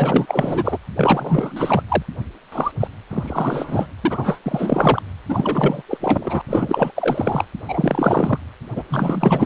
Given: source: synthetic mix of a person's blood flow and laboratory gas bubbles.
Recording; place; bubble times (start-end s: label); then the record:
Doppler ultrasound of blood flow; precordium
0.00-0.78 s: bubbles
0.96-1.83 s: bubbles
1.88-2.02 s: bubbles
2.52-2.71 s: bubbles
2.79-2.88 s: bubbles
3.10-3.86 s: bubbles
4.01-4.38 s: bubbles
4.45-5.02 s: bubbles
5.28-5.82 s: bubbles
5.88-5.97 s: bubbles
6.00-6.42 s: bubbles
6.48-6.91 s: bubbles
6.95-7.44 s: bubbles
7.68-8.38 s: bubbles
8.76-8.84 s: bubbles
8.89-9.46 s: bubbles
From the record:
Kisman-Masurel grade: 444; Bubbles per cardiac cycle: continuous sound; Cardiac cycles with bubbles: 100%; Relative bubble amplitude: maximal (0.775 to 0.999); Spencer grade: 4 (maximum detectable bubble signal sounding continuously throughout systole and diastole of every cardiac period, and overriding the amplitude of the normal cardiac signals); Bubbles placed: anywhere in the cardiac cycle